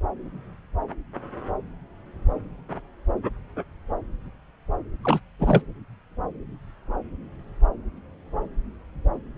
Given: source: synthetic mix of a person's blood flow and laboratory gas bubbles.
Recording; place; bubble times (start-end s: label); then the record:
Doppler ultrasound of blood flow; subclavian vein
5.02-5.19 s: bubbles
5.39-5.62 s: bubbles
From the record:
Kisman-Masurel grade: 212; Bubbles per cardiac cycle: several, 3 to 8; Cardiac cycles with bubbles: 1 to 10%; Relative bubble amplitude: moderate (0.250 to 0.450); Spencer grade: 1 (occasional bubble signal discernible with the cardiac motion signal, with majority of cardiac periods free of bubbles); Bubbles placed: anywhere in the cardiac cycle